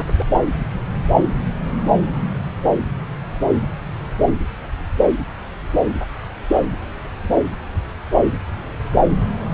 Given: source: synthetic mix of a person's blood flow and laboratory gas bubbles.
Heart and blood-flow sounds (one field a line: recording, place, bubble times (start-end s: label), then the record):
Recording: Doppler ultrasound of blood flow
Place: subclavian vein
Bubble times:
0.07-0.25 s: bubbles
From the record:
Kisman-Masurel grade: 211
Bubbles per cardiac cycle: several, 3 to 8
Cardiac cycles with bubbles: 1 to 10%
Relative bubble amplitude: barely perceptible (0.100 to 0.250)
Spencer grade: 1 (occasional bubble signal discernible with the cardiac motion signal, with majority of cardiac periods free of bubbles)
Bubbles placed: anywhere in the cardiac cycle